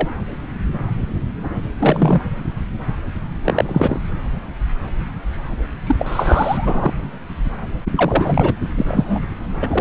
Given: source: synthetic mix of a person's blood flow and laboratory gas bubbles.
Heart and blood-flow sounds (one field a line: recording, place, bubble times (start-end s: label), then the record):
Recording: Doppler ultrasound of blood flow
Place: subclavian vein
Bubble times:
0.00-0.08 s: bubbles
1.79-2.21 s: bubbles
3.44-3.65 s: bubbles
3.67-4.00 s: bubbles
5.87-5.96 s: bubbles
5.99-6.93 s: bubbles
7.95-8.54 s: bubbles
8.77-8.85 s: bubbles
8.88-9.23 s: bubbles
9.62-9.81 s: bubbles
From the record:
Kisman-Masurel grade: 233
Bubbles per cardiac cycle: several, 3 to 8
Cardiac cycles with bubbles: 50 to 99%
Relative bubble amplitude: loud (0.450 to 0.775)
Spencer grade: 3 (all of the cardiac periods contain showers or single bubble signals, but not dominating or overriding the cardiac motion signals)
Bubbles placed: anywhere in the cardiac cycle